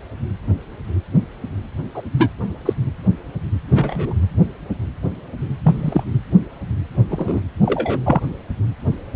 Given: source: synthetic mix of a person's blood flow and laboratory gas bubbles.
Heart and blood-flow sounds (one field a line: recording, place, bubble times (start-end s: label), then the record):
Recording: Doppler ultrasound of blood flow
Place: precordium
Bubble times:
1.94-2.02 s: bubbles
2.18-2.31 s: bubbles
2.65-2.74 s: bubbles
3.72-4.13 s: bubbles
5.63-6.04 s: bubbles
7.10-7.40 s: bubbles
7.62-7.99 s: bubbles
8.05-8.20 s: bubbles
From the record:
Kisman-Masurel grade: 123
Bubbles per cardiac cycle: 1 to 2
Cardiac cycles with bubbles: 10 to 50%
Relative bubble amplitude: loud (0.450 to 0.775)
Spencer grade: 2 (many but less than half of the cardiac periods contain bubble signals, singularly or in groups)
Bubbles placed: anywhere in the cardiac cycle